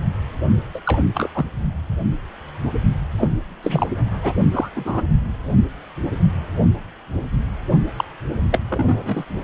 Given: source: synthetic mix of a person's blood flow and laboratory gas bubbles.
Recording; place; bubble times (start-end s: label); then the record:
Doppler ultrasound of blood flow; precordium
0.74-0.80 s: bubbles
0.85-1.02 s: bubbles
1.15-1.29 s: bubbles
1.34-1.45 s: bubbles
3.19-3.27 s: bubbles
3.62-3.89 s: bubbles
4.21-4.33 s: bubbles
4.51-4.70 s: bubbles
4.75-5.01 s: bubbles
7.97-8.05 s: bubbles
8.52-8.59 s: bubbles
8.69-9.25 s: bubbles
From the record:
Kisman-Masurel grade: 232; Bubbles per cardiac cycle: several, 3 to 8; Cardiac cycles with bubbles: 50 to 99%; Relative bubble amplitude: moderate (0.250 to 0.450); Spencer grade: 3 (all of the cardiac periods contain showers or single bubble signals, but not dominating or overriding the cardiac motion signals); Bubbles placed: only in the low amplitude regions of the cardiac cycle